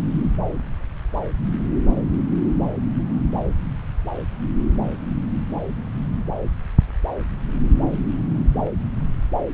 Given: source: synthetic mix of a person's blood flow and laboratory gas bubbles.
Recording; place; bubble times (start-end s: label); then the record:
Doppler ultrasound of blood flow; subclavian vein
8.65-8.71 s: bubbles
From the record:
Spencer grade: 1 (occasional bubble signal discernible with the cardiac motion signal, with majority of cardiac periods free of bubbles); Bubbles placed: anywhere in the cardiac cycle